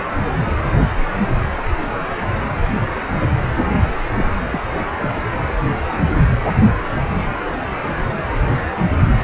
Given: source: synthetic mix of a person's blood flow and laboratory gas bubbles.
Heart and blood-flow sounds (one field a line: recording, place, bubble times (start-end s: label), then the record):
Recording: Doppler ultrasound of blood flow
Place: precordium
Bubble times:
4.17-4.25 s: bubbles
4.50-4.61 s: bubbles
5.01-5.09 s: bubbles
From the record:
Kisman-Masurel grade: 212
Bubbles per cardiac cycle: several, 3 to 8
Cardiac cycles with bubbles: 1 to 10%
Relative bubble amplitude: moderate (0.250 to 0.450)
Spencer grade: 1 (occasional bubble signal discernible with the cardiac motion signal, with majority of cardiac periods free of bubbles)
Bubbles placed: anywhere in the cardiac cycle